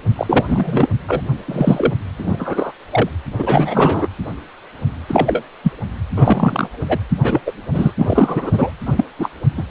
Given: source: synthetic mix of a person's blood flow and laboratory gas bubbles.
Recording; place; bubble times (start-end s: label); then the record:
Doppler ultrasound of blood flow; precordium
0.15-0.44 s: bubbles
0.48-0.90 s: bubbles
1.07-1.21 s: bubbles
1.48-1.94 s: bubbles
2.18-2.72 s: bubbles
2.90-3.09 s: bubbles
3.38-4.09 s: bubbles
5.08-5.42 s: bubbles
5.63-5.72 s: bubbles
6.16-6.69 s: bubbles
6.88-6.98 s: bubbles
7.23-7.41 s: bubbles
7.46-7.52 s: bubbles
7.72-7.91 s: bubbles
7.97-8.72 s: bubbles
8.86-9.04 s: bubbles
9.19-9.29 s: bubbles
9.57-9.63 s: bubbles
From the record:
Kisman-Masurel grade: 233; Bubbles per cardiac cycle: several, 3 to 8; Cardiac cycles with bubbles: 50 to 99%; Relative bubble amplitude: loud (0.450 to 0.775); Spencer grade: 3 (all of the cardiac periods contain showers or single bubble signals, but not dominating or overriding the cardiac motion signals); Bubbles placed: anywhere in the cardiac cycle